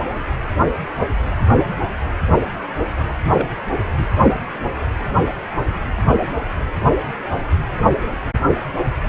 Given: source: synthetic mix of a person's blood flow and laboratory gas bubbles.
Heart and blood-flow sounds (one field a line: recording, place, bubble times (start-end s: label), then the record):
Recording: Doppler ultrasound of blood flow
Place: precordium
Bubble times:
3.34-3.49 s: bubbles
3.98-4.05 s: bubbles
From the record:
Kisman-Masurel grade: 112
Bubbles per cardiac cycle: 1 to 2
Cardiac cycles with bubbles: 1 to 10%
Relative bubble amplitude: moderate (0.250 to 0.450)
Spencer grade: 1 (occasional bubble signal discernible with the cardiac motion signal, with majority of cardiac periods free of bubbles)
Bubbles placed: anywhere in the cardiac cycle